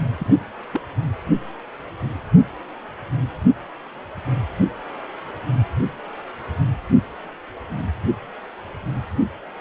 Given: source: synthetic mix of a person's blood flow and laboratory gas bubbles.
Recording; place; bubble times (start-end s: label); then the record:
Doppler ultrasound of blood flow; precordium
0.19-0.38 s: bubbles
0.73-0.81 s: bubbles
From the record:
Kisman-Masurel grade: 211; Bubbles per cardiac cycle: several, 3 to 8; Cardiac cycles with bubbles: 1 to 10%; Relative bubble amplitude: barely perceptible (0.100 to 0.250); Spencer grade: 1 (occasional bubble signal discernible with the cardiac motion signal, with majority of cardiac periods free of bubbles); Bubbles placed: only in the low amplitude regions of the cardiac cycle